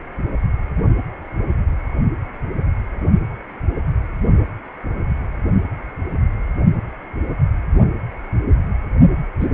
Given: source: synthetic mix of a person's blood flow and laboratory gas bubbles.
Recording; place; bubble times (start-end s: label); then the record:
Doppler ultrasound of blood flow; precordium
9.39-9.47 s: bubbles
From the record:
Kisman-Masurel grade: 112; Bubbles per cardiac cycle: 1 to 2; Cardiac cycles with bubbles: 1 to 10%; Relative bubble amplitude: moderate (0.250 to 0.450); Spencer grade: 1 (occasional bubble signal discernible with the cardiac motion signal, with majority of cardiac periods free of bubbles); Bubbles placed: only in the low amplitude regions of the cardiac cycle